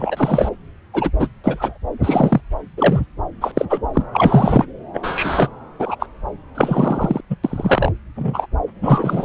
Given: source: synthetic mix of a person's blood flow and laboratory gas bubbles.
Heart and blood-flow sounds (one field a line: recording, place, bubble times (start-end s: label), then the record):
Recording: Doppler ultrasound of blood flow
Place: subclavian vein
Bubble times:
0.00-0.49 s: bubbles
0.93-1.10 s: bubbles
1.19-1.27 s: bubbles
1.44-1.78 s: bubbles
2.03-2.41 s: bubbles
2.77-3.00 s: bubbles
3.41-3.51 s: bubbles
3.57-3.66 s: bubbles
3.70-3.80 s: bubbles
3.93-4.02 s: bubbles
4.12-4.65 s: bubbles
4.93-5.48 s: bubbles
5.79-5.96 s: bubbles
6.00-6.06 s: bubbles
6.54-7.21 s: bubbles
7.29-7.36 s: bubbles
7.43-7.92 s: bubbles
8.15-8.46 s: bubbles
8.83-9.25 s: bubbles
From the record:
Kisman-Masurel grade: 243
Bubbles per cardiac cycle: several, 3 to 8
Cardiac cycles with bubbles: 100%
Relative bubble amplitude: loud (0.450 to 0.775)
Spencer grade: 3 (all of the cardiac periods contain showers or single bubble signals, but not dominating or overriding the cardiac motion signals)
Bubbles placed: anywhere in the cardiac cycle